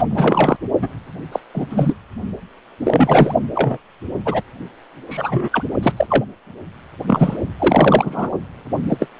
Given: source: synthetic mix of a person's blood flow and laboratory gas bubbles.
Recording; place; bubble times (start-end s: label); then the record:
Doppler ultrasound of blood flow; precordium
0.00-0.03 s: bubbles
0.10-0.56 s: bubbles
0.81-0.89 s: bubbles
1.32-1.40 s: bubbles
1.54-1.67 s: bubbles
1.69-1.94 s: bubbles
2.84-3.34 s: bubbles
3.54-3.77 s: bubbles
4.25-4.42 s: bubbles
5.09-5.49 s: bubbles
5.52-5.62 s: bubbles
5.83-5.94 s: bubbles
5.97-6.07 s: bubbles
6.10-6.25 s: bubbles
7.07-7.37 s: bubbles
7.58-8.29 s: bubbles
8.89-9.08 s: bubbles
From the record:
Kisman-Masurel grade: 243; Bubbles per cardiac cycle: several, 3 to 8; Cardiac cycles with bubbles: 100%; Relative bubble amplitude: loud (0.450 to 0.775); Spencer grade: 3 (all of the cardiac periods contain showers or single bubble signals, but not dominating or overriding the cardiac motion signals); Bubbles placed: only in the low amplitude regions of the cardiac cycle